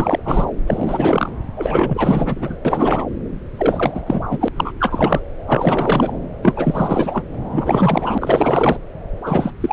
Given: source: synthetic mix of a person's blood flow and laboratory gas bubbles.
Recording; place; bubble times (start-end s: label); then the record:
Doppler ultrasound of blood flow; subclavian vein
0.00-0.21 s: bubbles
0.25-0.45 s: bubbles
0.67-1.29 s: bubbles
1.56-2.57 s: bubbles
2.65-3.05 s: bubbles
3.55-4.02 s: bubbles
4.06-4.20 s: bubbles
4.30-4.49 s: bubbles
4.56-4.73 s: bubbles
4.79-5.21 s: bubbles
5.47-6.12 s: bubbles
6.42-7.24 s: bubbles
7.51-8.79 s: bubbles
9.26-9.52 s: bubbles
9.61-9.73 s: bubbles
From the record:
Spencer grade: 4 (maximum detectable bubble signal sounding continuously throughout systole and diastole of every cardiac period, and overriding the amplitude of the normal cardiac signals); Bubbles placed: anywhere in the cardiac cycle